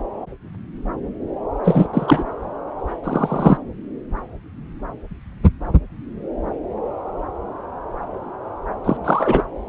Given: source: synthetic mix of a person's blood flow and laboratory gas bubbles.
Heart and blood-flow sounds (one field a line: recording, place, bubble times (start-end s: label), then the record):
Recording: Doppler ultrasound of blood flow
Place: subclavian vein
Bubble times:
1.64-1.87 s: bubbles
1.93-2.25 s: bubbles
3.04-3.58 s: bubbles
8.84-8.97 s: bubbles
9.03-9.43 s: bubbles
From the record:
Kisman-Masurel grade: 223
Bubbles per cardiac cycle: several, 3 to 8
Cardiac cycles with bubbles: 10 to 50%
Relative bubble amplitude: loud (0.450 to 0.775)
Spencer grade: 2 (many but less than half of the cardiac periods contain bubble signals, singularly or in groups)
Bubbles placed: anywhere in the cardiac cycle